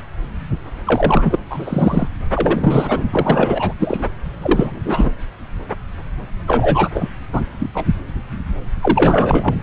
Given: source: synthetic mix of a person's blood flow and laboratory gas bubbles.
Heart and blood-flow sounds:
Doppler ultrasound of blood flow; subclavian vein
0.85-1.38 s: bubbles
1.49-2.08 s: bubbles
2.32-3.04 s: bubbles
3.10-3.74 s: bubbles
3.79-4.07 s: bubbles
4.39-4.79 s: bubbles
4.85-5.12 s: bubbles
6.47-6.89 s: bubbles
6.94-7.09 s: bubbles
7.32-7.42 s: bubbles
7.59-7.70 s: bubbles
7.75-7.87 s: bubbles
8.81-9.55 s: bubbles
From the record:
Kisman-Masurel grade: 333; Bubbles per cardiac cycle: rolling drumbeat, 9 or more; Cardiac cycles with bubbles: 50 to 99%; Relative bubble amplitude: loud (0.450 to 0.775); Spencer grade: 3 (all of the cardiac periods contain showers or single bubble signals, but not dominating or overriding the cardiac motion signals); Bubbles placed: anywhere in the cardiac cycle

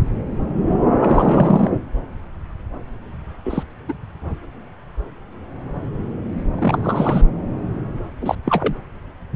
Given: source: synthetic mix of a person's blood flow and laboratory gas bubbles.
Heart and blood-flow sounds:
Doppler ultrasound of blood flow; subclavian vein
0.98-1.71 s: bubbles
3.45-3.63 s: bubbles
3.88-3.94 s: bubbles
6.58-7.21 s: bubbles
8.21-8.35 s: bubbles
8.45-8.75 s: bubbles
From the record:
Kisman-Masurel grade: 222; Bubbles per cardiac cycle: several, 3 to 8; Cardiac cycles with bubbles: 10 to 50%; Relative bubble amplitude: moderate (0.250 to 0.450); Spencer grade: 2 (many but less than half of the cardiac periods contain bubble signals, singularly or in groups); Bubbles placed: anywhere in the cardiac cycle

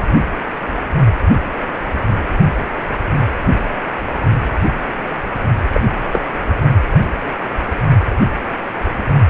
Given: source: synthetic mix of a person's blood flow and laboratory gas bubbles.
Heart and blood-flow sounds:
Doppler ultrasound of blood flow; precordium
5.73-5.81 s: bubbles
6.12-6.21 s: bubbles
From the record:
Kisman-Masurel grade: 113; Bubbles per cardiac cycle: 1 to 2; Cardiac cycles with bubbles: 1 to 10%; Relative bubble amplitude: loud (0.450 to 0.775); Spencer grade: 1 (occasional bubble signal discernible with the cardiac motion signal, with majority of cardiac periods free of bubbles); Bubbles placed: only in the low amplitude regions of the cardiac cycle

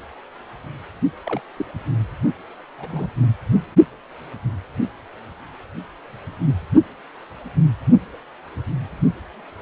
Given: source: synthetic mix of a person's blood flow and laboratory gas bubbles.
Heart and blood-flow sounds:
Doppler ultrasound of blood flow; precordium
1.24-1.42 s: bubbles
1.56-1.65 s: bubbles
2.78-3.08 s: bubbles
3.22-3.26 s: bubbles
From the record:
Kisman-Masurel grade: 121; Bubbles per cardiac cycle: 1 to 2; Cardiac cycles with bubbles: 10 to 50%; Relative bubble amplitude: barely perceptible (0.100 to 0.250); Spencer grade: 2 (many but less than half of the cardiac periods contain bubble signals, singularly or in groups); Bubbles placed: anywhere in the cardiac cycle

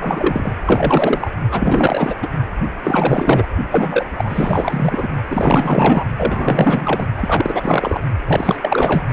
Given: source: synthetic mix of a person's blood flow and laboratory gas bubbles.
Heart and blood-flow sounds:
Doppler ultrasound of blood flow; precordium
0.00-0.52 s: bubbles
0.66-1.31 s: bubbles
1.50-2.15 s: bubbles
2.22-2.28 s: bubbles
2.83-3.48 s: bubbles
3.71-4.06 s: bubbles
4.16-5.08 s: bubbles
5.29-6.04 s: bubbles
6.17-7.07 s: bubbles
7.17-8.01 s: bubbles
8.26-8.57 s: bubbles
8.61-9.04 s: bubbles
From the record:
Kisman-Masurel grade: 444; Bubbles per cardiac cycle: continuous sound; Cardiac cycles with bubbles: 100%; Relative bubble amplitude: maximal (0.775 to 0.999); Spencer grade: 4 (maximum detectable bubble signal sounding continuously throughout systole and diastole of every cardiac period, and overriding the amplitude of the normal cardiac signals); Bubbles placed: only in the low amplitude regions of the cardiac cycle

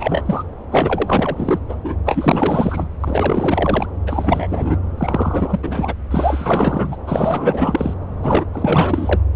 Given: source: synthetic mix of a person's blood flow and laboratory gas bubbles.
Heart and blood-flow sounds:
Doppler ultrasound of blood flow; subclavian vein
0.00-0.44 s: bubbles
0.71-1.59 s: bubbles
1.69-1.75 s: bubbles
1.85-1.96 s: bubbles
2.05-2.90 s: bubbles
3.00-3.86 s: bubbles
4.06-4.77 s: bubbles
4.97-5.59 s: bubbles
5.62-5.94 s: bubbles
6.10-6.96 s: bubbles
7.05-7.94 s: bubbles
8.22-8.45 s: bubbles
8.53-9.20 s: bubbles
From the record:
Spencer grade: 4 (maximum detectable bubble signal sounding continuously throughout systole and diastole of every cardiac period, and overriding the amplitude of the normal cardiac signals); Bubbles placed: anywhere in the cardiac cycle

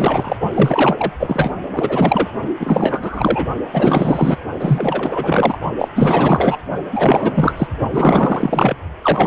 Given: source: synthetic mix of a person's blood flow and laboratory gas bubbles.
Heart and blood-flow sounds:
Doppler ultrasound of blood flow; precordium
0.00-0.36 s: bubbles
0.54-1.12 s: bubbles
1.19-1.51 s: bubbles
1.76-2.29 s: bubbles
2.60-3.46 s: bubbles
3.71-4.37 s: bubbles
4.59-5.58 s: bubbles
5.77-5.89 s: bubbles
5.95-6.58 s: bubbles
6.92-7.53 s: bubbles
7.57-7.67 s: bubbles
7.92-8.76 s: bubbles
9.02-9.26 s: bubbles
From the record:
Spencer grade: 4 (maximum detectable bubble signal sounding continuously throughout systole and diastole of every cardiac period, and overriding the amplitude of the normal cardiac signals); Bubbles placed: only in the low amplitude regions of the cardiac cycle

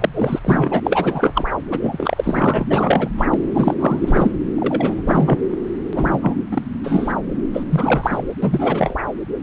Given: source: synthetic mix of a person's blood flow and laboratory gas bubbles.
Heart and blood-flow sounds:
Doppler ultrasound of blood flow; subclavian vein
0.00-0.10 s: bubbles
0.14-0.39 s: bubbles
0.45-1.44 s: bubbles
1.71-2.65 s: bubbles
2.69-3.09 s: bubbles
3.17-3.25 s: bubbles
3.29-3.38 s: bubbles
3.54-3.74 s: bubbles
3.79-4.31 s: bubbles
4.57-5.02 s: bubbles
5.06-5.39 s: bubbles
5.92-6.36 s: bubbles
6.51-6.62 s: bubbles
6.83-7.13 s: bubbles
7.54-7.64 s: bubbles
7.70-8.24 s: bubbles
8.42-8.96 s: bubbles
From the record:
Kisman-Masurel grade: 333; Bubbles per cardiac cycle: rolling drumbeat, 9 or more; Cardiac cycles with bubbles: 50 to 99%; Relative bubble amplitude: loud (0.450 to 0.775); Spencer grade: 3 (all of the cardiac periods contain showers or single bubble signals, but not dominating or overriding the cardiac motion signals); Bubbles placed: anywhere in the cardiac cycle

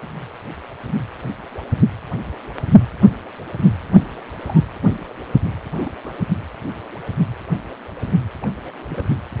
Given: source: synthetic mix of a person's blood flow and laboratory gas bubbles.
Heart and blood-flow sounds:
Doppler ultrasound of blood flow; precordium
3.85-4.12 s: bubbles
4.29-4.64 s: bubbles
5.80-5.91 s: bubbles
6.04-6.12 s: bubbles
6.18-6.22 s: bubbles
8.42-8.47 s: bubbles
8.64-8.71 s: bubbles
8.84-9.10 s: bubbles
From the record:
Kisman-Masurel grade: 221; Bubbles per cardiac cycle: several, 3 to 8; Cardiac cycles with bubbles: 10 to 50%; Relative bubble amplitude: barely perceptible (0.100 to 0.250); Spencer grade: 2 (many but less than half of the cardiac periods contain bubble signals, singularly or in groups); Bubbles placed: anywhere in the cardiac cycle

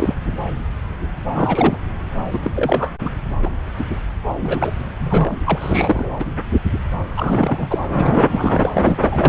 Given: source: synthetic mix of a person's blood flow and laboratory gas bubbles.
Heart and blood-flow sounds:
Doppler ultrasound of blood flow; subclavian vein
0.00-0.16 s: bubbles
1.35-1.79 s: bubbles
2.33-2.39 s: bubbles
2.45-2.51 s: bubbles
2.56-2.94 s: bubbles
3.01-3.10 s: bubbles
3.42-3.50 s: bubbles
4.42-4.72 s: bubbles
5.00-5.37 s: bubbles
5.46-6.11 s: bubbles
6.19-6.25 s: bubbles
7.17-7.67 s: bubbles
7.70-7.78 s: bubbles
7.94-8.71 s: bubbles
8.74-8.98 s: bubbles
9.01-9.29 s: bubbles
From the record:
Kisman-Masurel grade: 332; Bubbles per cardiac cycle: rolling drumbeat, 9 or more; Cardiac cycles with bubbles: 50 to 99%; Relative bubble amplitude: moderate (0.250 to 0.450); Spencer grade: 3 (all of the cardiac periods contain showers or single bubble signals, but not dominating or overriding the cardiac motion signals); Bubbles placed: anywhere in the cardiac cycle

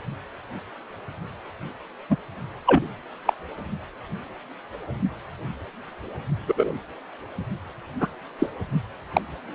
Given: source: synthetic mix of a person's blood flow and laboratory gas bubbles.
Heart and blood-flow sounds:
Doppler ultrasound of blood flow; precordium
2.09-2.16 s: bubbles
2.66-2.87 s: bubbles
3.25-3.33 s: bubbles
6.48-6.54 s: bubbles
6.57-6.73 s: bubbles
8.00-8.07 s: bubbles
8.38-8.46 s: bubbles
9.14-9.22 s: bubbles
From the record:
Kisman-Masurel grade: 123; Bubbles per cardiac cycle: 1 to 2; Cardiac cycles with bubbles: 10 to 50%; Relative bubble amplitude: loud (0.450 to 0.775); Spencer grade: 2 (many but less than half of the cardiac periods contain bubble signals, singularly or in groups); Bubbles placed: only in the low amplitude regions of the cardiac cycle

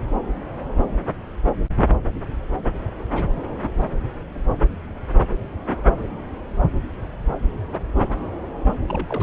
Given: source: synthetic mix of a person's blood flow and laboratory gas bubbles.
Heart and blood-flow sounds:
Doppler ultrasound of blood flow; subclavian vein
8.88-9.23 s: bubbles
From the record:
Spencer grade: 1 (occasional bubble signal discernible with the cardiac motion signal, with majority of cardiac periods free of bubbles); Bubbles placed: anywhere in the cardiac cycle

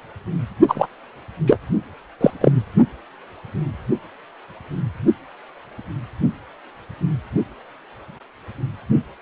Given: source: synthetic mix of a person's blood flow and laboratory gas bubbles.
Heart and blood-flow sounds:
Doppler ultrasound of blood flow; precordium
0.68-0.87 s: bubbles
1.46-1.58 s: bubbles
2.21-2.31 s: bubbles
2.41-2.52 s: bubbles
From the record:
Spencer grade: 2 (many but less than half of the cardiac periods contain bubble signals, singularly or in groups); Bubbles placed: only in the low amplitude regions of the cardiac cycle

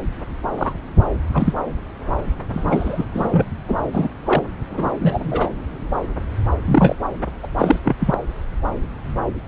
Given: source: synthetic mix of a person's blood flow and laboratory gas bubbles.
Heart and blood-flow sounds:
Doppler ultrasound of blood flow; subclavian vein
0.58-0.72 s: bubbles
1.33-1.53 s: bubbles
2.52-3.06 s: bubbles
3.14-3.46 s: bubbles
3.68-3.77 s: bubbles
3.92-4.08 s: bubbles
4.26-4.42 s: bubbles
4.70-4.92 s: bubbles
5.00-5.49 s: bubbles
6.65-6.96 s: bubbles
7.43-7.47 s: bubbles
7.58-7.79 s: bubbles
7.85-7.96 s: bubbles
8.00-8.18 s: bubbles
From the record:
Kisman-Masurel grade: 233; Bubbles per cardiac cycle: several, 3 to 8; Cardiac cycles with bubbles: 50 to 99%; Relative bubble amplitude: loud (0.450 to 0.775); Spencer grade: 3 (all of the cardiac periods contain showers or single bubble signals, but not dominating or overriding the cardiac motion signals); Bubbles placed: anywhere in the cardiac cycle

